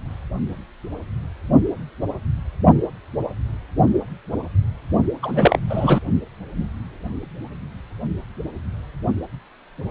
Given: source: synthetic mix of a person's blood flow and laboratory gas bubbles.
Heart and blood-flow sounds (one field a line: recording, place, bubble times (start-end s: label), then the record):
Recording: Doppler ultrasound of blood flow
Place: precordium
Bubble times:
5.23-5.59 s: bubbles
5.70-6.00 s: bubbles
From the record:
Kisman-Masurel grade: 213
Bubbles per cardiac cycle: several, 3 to 8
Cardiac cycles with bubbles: 1 to 10%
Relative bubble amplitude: loud (0.450 to 0.775)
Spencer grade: 1 (occasional bubble signal discernible with the cardiac motion signal, with majority of cardiac periods free of bubbles)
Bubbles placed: only in the low amplitude regions of the cardiac cycle